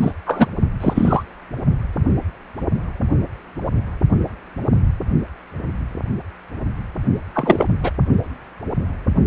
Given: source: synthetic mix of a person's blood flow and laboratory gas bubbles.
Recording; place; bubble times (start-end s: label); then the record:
Doppler ultrasound of blood flow; precordium
0.01-0.12 s: bubbles
0.25-0.48 s: bubbles
0.80-1.23 s: bubbles
7.34-7.69 s: bubbles
7.83-7.91 s: bubbles
From the record:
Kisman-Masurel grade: 223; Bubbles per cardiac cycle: several, 3 to 8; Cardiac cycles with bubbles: 10 to 50%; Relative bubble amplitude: loud (0.450 to 0.775); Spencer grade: 2 (many but less than half of the cardiac periods contain bubble signals, singularly or in groups); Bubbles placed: only in the low amplitude regions of the cardiac cycle